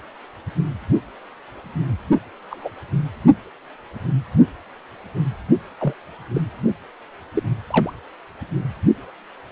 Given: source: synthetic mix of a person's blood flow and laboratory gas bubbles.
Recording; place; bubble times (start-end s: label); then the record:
Doppler ultrasound of blood flow; precordium
2.50-2.69 s: bubbles
5.79-5.93 s: bubbles
6.34-6.42 s: bubbles
7.35-7.43 s: bubbles
7.70-7.92 s: bubbles
From the record:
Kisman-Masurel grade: 122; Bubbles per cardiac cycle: 1 to 2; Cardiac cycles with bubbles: 10 to 50%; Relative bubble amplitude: moderate (0.250 to 0.450); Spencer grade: 2 (many but less than half of the cardiac periods contain bubble signals, singularly or in groups); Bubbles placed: only in the low amplitude regions of the cardiac cycle